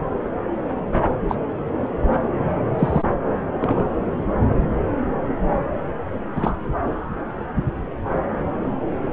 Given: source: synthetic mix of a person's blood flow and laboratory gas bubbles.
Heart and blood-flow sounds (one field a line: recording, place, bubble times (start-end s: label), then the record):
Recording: Doppler ultrasound of blood flow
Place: subclavian vein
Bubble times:
1.28-1.36 s: bubbles
2.79-3.02 s: bubbles
3.60-3.89 s: bubbles
6.36-6.57 s: bubbles
From the record:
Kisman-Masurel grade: 122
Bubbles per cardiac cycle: 1 to 2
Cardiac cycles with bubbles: 10 to 50%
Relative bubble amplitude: moderate (0.250 to 0.450)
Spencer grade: 2 (many but less than half of the cardiac periods contain bubble signals, singularly or in groups)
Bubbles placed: anywhere in the cardiac cycle